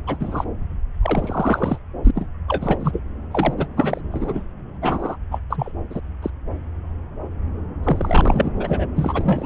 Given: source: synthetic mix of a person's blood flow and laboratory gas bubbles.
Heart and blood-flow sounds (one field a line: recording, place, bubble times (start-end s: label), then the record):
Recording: Doppler ultrasound of blood flow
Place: subclavian vein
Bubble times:
0.07-0.45 s: bubbles
1.01-1.78 s: bubbles
2.04-2.11 s: bubbles
2.15-2.28 s: bubbles
2.48-3.02 s: bubbles
3.31-3.54 s: bubbles
3.57-3.67 s: bubbles
3.77-4.01 s: bubbles
4.12-4.44 s: bubbles
4.82-5.17 s: bubbles
5.31-5.39 s: bubbles
5.50-5.72 s: bubbles
5.90-6.00 s: bubbles
6.22-6.30 s: bubbles
7.83-8.52 s: bubbles
8.56-8.87 s: bubbles
8.96-9.46 s: bubbles
From the record:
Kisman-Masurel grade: 332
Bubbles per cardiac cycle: rolling drumbeat, 9 or more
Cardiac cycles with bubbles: 50 to 99%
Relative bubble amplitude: moderate (0.250 to 0.450)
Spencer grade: 3 (all of the cardiac periods contain showers or single bubble signals, but not dominating or overriding the cardiac motion signals)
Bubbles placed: anywhere in the cardiac cycle